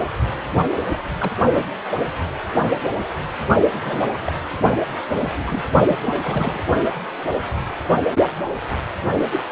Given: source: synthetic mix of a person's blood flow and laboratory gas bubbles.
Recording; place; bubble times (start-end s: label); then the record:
Doppler ultrasound of blood flow; precordium
0.93-0.98 s: bubbles
1.20-1.31 s: bubbles
1.54-1.65 s: bubbles
3.73-4.09 s: bubbles
4.13-4.20 s: bubbles
4.26-4.33 s: bubbles
4.53-4.58 s: bubbles
5.23-5.62 s: bubbles
5.87-5.98 s: bubbles
6.06-6.61 s: bubbles
9.31-9.43 s: bubbles
From the record:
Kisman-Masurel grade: 221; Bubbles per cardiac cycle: several, 3 to 8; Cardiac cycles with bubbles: 10 to 50%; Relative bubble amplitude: barely perceptible (0.100 to 0.250); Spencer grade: 2 (many but less than half of the cardiac periods contain bubble signals, singularly or in groups); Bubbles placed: only in the low amplitude regions of the cardiac cycle